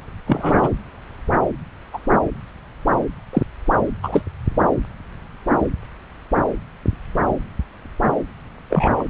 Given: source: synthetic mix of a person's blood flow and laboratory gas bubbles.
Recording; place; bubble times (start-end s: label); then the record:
Doppler ultrasound of blood flow; subclavian vein
0.27-0.69 s: bubbles
1.94-1.98 s: bubbles
3.33-3.42 s: bubbles
4.03-4.22 s: bubbles
8.69-9.04 s: bubbles
From the record:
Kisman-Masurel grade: 123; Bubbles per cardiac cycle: 1 to 2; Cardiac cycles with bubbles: 10 to 50%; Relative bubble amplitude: loud (0.450 to 0.775); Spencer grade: 2 (many but less than half of the cardiac periods contain bubble signals, singularly or in groups); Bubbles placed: anywhere in the cardiac cycle